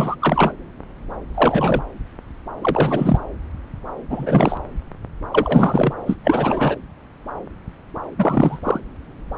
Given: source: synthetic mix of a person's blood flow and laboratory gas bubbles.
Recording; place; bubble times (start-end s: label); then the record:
Doppler ultrasound of blood flow; subclavian vein
0.00-0.15 s: bubbles
0.20-0.53 s: bubbles
1.34-1.82 s: bubbles
2.61-3.18 s: bubbles
4.10-4.57 s: bubbles
5.32-5.93 s: bubbles
6.06-6.15 s: bubbles
6.24-6.76 s: bubbles
8.18-8.58 s: bubbles
8.63-8.80 s: bubbles
From the record:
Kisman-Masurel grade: 333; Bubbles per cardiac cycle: rolling drumbeat, 9 or more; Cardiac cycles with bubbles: 50 to 99%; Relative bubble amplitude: loud (0.450 to 0.775); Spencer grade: 3 (all of the cardiac periods contain showers or single bubble signals, but not dominating or overriding the cardiac motion signals); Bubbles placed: anywhere in the cardiac cycle